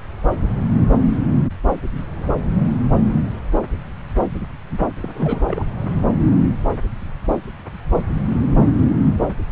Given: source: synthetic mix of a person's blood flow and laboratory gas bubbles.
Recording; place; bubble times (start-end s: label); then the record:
Doppler ultrasound of blood flow; subclavian vein
5.02-5.42 s: bubbles
5.48-5.63 s: bubbles
From the record:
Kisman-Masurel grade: 212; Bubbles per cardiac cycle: several, 3 to 8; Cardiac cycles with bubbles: 1 to 10%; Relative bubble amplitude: moderate (0.250 to 0.450); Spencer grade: 1 (occasional bubble signal discernible with the cardiac motion signal, with majority of cardiac periods free of bubbles); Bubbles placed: anywhere in the cardiac cycle